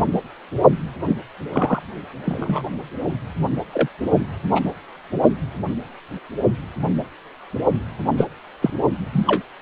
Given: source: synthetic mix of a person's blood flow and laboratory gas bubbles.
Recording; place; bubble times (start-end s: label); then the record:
Doppler ultrasound of blood flow; precordium
1.07-1.17 s: bubbles
1.53-1.80 s: bubbles
2.26-2.62 s: bubbles
3.73-3.88 s: bubbles
4.54-4.62 s: bubbles
8.18-8.26 s: bubbles
8.62-8.71 s: bubbles
9.12-9.42 s: bubbles
From the record:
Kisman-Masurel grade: 122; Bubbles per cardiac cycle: 1 to 2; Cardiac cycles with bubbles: 10 to 50%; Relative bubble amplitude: moderate (0.250 to 0.450); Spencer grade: 2 (many but less than half of the cardiac periods contain bubble signals, singularly or in groups); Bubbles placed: only in the low amplitude regions of the cardiac cycle